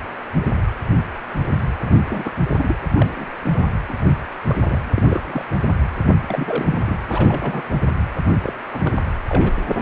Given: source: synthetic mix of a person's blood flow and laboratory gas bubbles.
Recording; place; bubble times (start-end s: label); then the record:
Doppler ultrasound of blood flow; precordium
1.85-1.96 s: bubbles
2.08-2.31 s: bubbles
2.49-2.75 s: bubbles
2.94-3.29 s: bubbles
3.44-3.67 s: bubbles
3.88-4.10 s: bubbles
4.47-4.81 s: bubbles
4.95-5.03 s: bubbles
5.05-5.21 s: bubbles
5.25-5.43 s: bubbles
6.28-6.96 s: bubbles
7.08-7.62 s: bubbles
8.42-8.53 s: bubbles
8.72-9.03 s: bubbles
9.29-9.53 s: bubbles
9.68-9.82 s: bubbles
From the record:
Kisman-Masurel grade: 232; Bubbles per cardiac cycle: several, 3 to 8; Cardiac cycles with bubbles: 50 to 99%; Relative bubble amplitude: moderate (0.250 to 0.450); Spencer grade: 3 (all of the cardiac periods contain showers or single bubble signals, but not dominating or overriding the cardiac motion signals); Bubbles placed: anywhere in the cardiac cycle